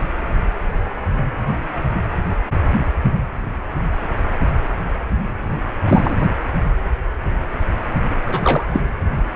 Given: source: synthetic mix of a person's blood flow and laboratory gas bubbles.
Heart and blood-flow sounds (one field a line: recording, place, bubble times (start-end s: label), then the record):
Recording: Doppler ultrasound of blood flow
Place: precordium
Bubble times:
5.88-6.26 s: bubbles
8.26-8.83 s: bubbles
From the record:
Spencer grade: 2 (many but less than half of the cardiac periods contain bubble signals, singularly or in groups)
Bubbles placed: anywhere in the cardiac cycle